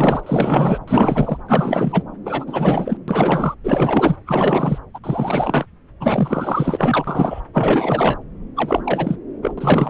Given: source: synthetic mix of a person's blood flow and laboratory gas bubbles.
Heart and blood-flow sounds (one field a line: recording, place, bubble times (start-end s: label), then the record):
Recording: Doppler ultrasound of blood flow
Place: subclavian vein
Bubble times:
0.00-0.78 s: bubbles
0.87-1.37 s: bubbles
1.48-2.04 s: bubbles
2.25-2.97 s: bubbles
3.08-3.55 s: bubbles
3.64-4.16 s: bubbles
4.26-4.79 s: bubbles
4.94-4.99 s: bubbles
5.04-5.66 s: bubbles
6.00-7.04 s: bubbles
7.07-7.42 s: bubbles
7.54-8.19 s: bubbles
8.56-9.16 s: bubbles
9.42-9.54 s: bubbles
9.58-9.89 s: bubbles
From the record:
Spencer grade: 4 (maximum detectable bubble signal sounding continuously throughout systole and diastole of every cardiac period, and overriding the amplitude of the normal cardiac signals)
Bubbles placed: anywhere in the cardiac cycle